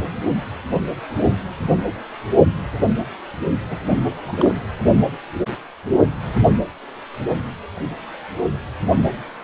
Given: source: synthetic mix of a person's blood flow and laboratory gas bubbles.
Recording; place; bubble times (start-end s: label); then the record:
Doppler ultrasound of blood flow; precordium
3.70-3.79 s: bubbles
3.84-4.04 s: bubbles
4.22-4.53 s: bubbles
From the record:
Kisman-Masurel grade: 211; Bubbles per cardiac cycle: several, 3 to 8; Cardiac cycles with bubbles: 1 to 10%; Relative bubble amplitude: barely perceptible (0.100 to 0.250); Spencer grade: 1 (occasional bubble signal discernible with the cardiac motion signal, with majority of cardiac periods free of bubbles); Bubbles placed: only in the low amplitude regions of the cardiac cycle